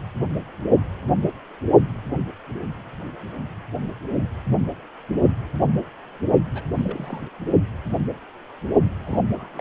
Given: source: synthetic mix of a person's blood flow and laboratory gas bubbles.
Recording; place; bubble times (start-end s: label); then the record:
Doppler ultrasound of blood flow; precordium
6.54-7.21 s: bubbles
9.04-9.22 s: bubbles
9.34-9.61 s: bubbles
From the record:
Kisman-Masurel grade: 221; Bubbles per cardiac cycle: several, 3 to 8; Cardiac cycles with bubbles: 10 to 50%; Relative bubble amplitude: barely perceptible (0.100 to 0.250); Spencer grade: 2 (many but less than half of the cardiac periods contain bubble signals, singularly or in groups); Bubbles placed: only in the low amplitude regions of the cardiac cycle